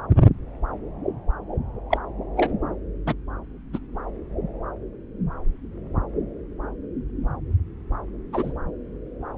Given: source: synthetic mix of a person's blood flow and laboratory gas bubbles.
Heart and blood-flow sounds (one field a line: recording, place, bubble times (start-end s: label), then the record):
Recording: Doppler ultrasound of blood flow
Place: subclavian vein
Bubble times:
1.90-1.98 s: bubbles
2.36-2.53 s: bubbles
3.06-3.14 s: bubbles
3.73-3.79 s: bubbles
8.32-8.52 s: bubbles
From the record:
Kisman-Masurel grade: 122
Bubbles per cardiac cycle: 1 to 2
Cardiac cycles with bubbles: 10 to 50%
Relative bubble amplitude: moderate (0.250 to 0.450)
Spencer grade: 2 (many but less than half of the cardiac periods contain bubble signals, singularly or in groups)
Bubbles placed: anywhere in the cardiac cycle